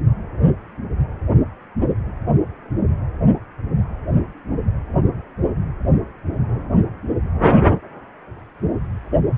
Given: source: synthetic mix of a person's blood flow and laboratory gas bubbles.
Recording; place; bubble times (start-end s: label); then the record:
Doppler ultrasound of blood flow; precordium
no bubbles
From the record:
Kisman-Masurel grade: 000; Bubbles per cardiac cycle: 0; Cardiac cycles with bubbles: 0%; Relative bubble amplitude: no bubbles discernible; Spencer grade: 0 (complete lack of bubble signals)